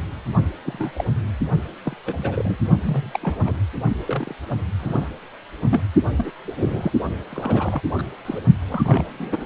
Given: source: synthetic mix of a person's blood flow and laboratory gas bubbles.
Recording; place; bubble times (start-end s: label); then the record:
Doppler ultrasound of blood flow; precordium
0.65-0.91 s: bubbles
0.96-1.04 s: bubbles
1.84-1.96 s: bubbles
2.06-2.56 s: bubbles
2.83-3.19 s: bubbles
3.22-3.53 s: bubbles
4.05-4.34 s: bubbles
4.79-5.08 s: bubbles
5.70-5.82 s: bubbles
6.17-6.32 s: bubbles
6.47-6.52 s: bubbles
6.55-6.92 s: bubbles
7.31-7.80 s: bubbles
7.98-8.03 s: bubbles
8.25-8.41 s: bubbles
8.68-9.45 s: bubbles
From the record:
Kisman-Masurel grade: 242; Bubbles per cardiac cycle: several, 3 to 8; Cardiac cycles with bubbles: 100%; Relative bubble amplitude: moderate (0.250 to 0.450); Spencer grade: 3 (all of the cardiac periods contain showers or single bubble signals, but not dominating or overriding the cardiac motion signals); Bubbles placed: only in the low amplitude regions of the cardiac cycle